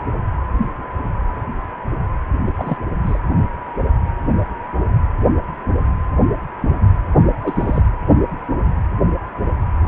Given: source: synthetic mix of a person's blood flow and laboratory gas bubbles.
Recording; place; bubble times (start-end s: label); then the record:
Doppler ultrasound of blood flow; precordium
2.46-2.78 s: bubbles
3.03-3.18 s: bubbles
7.42-7.82 s: bubbles
From the record:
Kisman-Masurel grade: 222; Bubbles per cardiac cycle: several, 3 to 8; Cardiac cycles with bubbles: 10 to 50%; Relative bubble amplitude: moderate (0.250 to 0.450); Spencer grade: 2 (many but less than half of the cardiac periods contain bubble signals, singularly or in groups); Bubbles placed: anywhere in the cardiac cycle